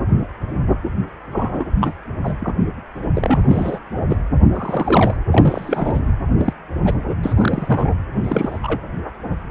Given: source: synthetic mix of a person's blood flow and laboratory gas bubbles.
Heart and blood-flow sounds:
Doppler ultrasound of blood flow; precordium
1.31-1.66 s: bubbles
1.79-1.94 s: bubbles
2.23-2.54 s: bubbles
3.15-3.79 s: bubbles
3.95-4.02 s: bubbles
4.08-4.17 s: bubbles
4.54-5.16 s: bubbles
5.31-6.01 s: bubbles
6.37-6.53 s: bubbles
6.85-6.97 s: bubbles
7.23-7.93 s: bubbles
8.23-8.58 s: bubbles
8.63-8.80 s: bubbles
From the record:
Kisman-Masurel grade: 242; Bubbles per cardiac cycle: several, 3 to 8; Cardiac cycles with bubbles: 100%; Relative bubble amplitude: moderate (0.250 to 0.450); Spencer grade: 3 (all of the cardiac periods contain showers or single bubble signals, but not dominating or overriding the cardiac motion signals); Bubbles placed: anywhere in the cardiac cycle

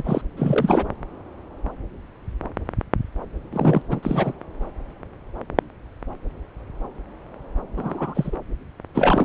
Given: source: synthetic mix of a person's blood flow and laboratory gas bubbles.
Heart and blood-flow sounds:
Doppler ultrasound of blood flow; subclavian vein
0.00-0.22 s: bubbles
0.36-0.86 s: bubbles
3.53-3.82 s: bubbles
3.89-4.00 s: bubbles
4.03-4.33 s: bubbles
7.76-8.37 s: bubbles
8.94-9.25 s: bubbles
From the record:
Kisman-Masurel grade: 222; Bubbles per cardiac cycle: several, 3 to 8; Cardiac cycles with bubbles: 10 to 50%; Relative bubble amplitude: moderate (0.250 to 0.450); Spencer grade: 2 (many but less than half of the cardiac periods contain bubble signals, singularly or in groups); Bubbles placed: anywhere in the cardiac cycle

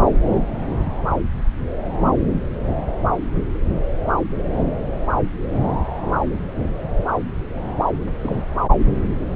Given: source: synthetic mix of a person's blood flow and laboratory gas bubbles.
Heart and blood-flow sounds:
Doppler ultrasound of blood flow; subclavian vein
8.18-8.44 s: bubbles
From the record:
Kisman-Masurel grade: 211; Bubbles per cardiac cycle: several, 3 to 8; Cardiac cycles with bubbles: 1 to 10%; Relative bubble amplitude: barely perceptible (0.100 to 0.250); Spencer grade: 1 (occasional bubble signal discernible with the cardiac motion signal, with majority of cardiac periods free of bubbles); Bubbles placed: anywhere in the cardiac cycle

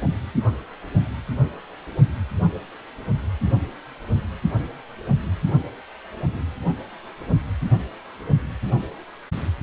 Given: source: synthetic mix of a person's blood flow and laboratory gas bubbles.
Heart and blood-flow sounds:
Doppler ultrasound of blood flow; precordium
no bubbles
From the record:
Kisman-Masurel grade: 000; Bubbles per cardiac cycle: 0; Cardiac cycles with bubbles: 0%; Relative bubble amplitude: no bubbles discernible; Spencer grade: 0 (complete lack of bubble signals)

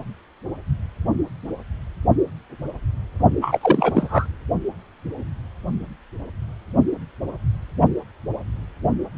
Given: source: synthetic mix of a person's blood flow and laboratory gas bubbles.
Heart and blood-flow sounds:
Doppler ultrasound of blood flow; precordium
3.42-4.27 s: bubbles
From the record:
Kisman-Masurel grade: 213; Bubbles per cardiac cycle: several, 3 to 8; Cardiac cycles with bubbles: 1 to 10%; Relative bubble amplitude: loud (0.450 to 0.775); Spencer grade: 1 (occasional bubble signal discernible with the cardiac motion signal, with majority of cardiac periods free of bubbles); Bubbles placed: only in the low amplitude regions of the cardiac cycle

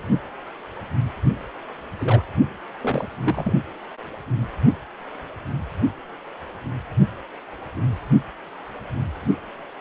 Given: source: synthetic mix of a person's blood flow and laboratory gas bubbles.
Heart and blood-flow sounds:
Doppler ultrasound of blood flow; precordium
1.99-2.23 s: bubbles
2.81-3.07 s: bubbles
3.23-3.56 s: bubbles
From the record:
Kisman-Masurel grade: 211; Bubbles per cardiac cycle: several, 3 to 8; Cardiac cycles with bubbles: 1 to 10%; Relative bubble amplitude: barely perceptible (0.100 to 0.250); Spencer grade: 1 (occasional bubble signal discernible with the cardiac motion signal, with majority of cardiac periods free of bubbles); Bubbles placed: anywhere in the cardiac cycle

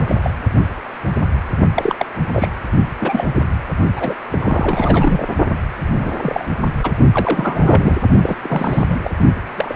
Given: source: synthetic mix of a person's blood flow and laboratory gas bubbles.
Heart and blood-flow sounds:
Doppler ultrasound of blood flow; precordium
0.00-0.18 s: bubbles
0.23-0.31 s: bubbles
1.74-1.95 s: bubbles
1.98-2.05 s: bubbles
2.32-2.49 s: bubbles
3.00-3.25 s: bubbles
3.35-3.42 s: bubbles
3.96-4.14 s: bubbles
4.30-5.25 s: bubbles
5.91-6.12 s: bubbles
6.17-6.45 s: bubbles
6.83-6.92 s: bubbles
7.12-7.97 s: bubbles
8.22-8.39 s: bubbles
8.43-8.99 s: bubbles
9.02-9.11 s: bubbles
9.58-9.76 s: bubbles
From the record:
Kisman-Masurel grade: 232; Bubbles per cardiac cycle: several, 3 to 8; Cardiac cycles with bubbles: 50 to 99%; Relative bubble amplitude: moderate (0.250 to 0.450); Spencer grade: 3 (all of the cardiac periods contain showers or single bubble signals, but not dominating or overriding the cardiac motion signals); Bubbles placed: only in the low amplitude regions of the cardiac cycle

